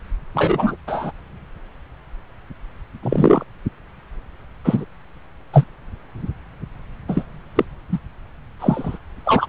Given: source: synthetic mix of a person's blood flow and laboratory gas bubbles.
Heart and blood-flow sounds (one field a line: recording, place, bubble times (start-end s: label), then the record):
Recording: Doppler ultrasound of blood flow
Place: subclavian vein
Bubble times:
0.34-0.76 s: bubbles
0.87-1.11 s: bubbles
3.02-3.44 s: bubbles
4.64-4.85 s: bubbles
5.53-5.64 s: bubbles
7.08-7.26 s: bubbles
7.55-7.65 s: bubbles
7.92-7.99 s: bubbles
8.59-8.98 s: bubbles
9.24-9.46 s: bubbles
From the record:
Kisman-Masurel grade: 123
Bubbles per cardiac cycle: 1 to 2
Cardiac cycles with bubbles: 10 to 50%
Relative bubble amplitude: loud (0.450 to 0.775)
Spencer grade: 2 (many but less than half of the cardiac periods contain bubble signals, singularly or in groups)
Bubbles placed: anywhere in the cardiac cycle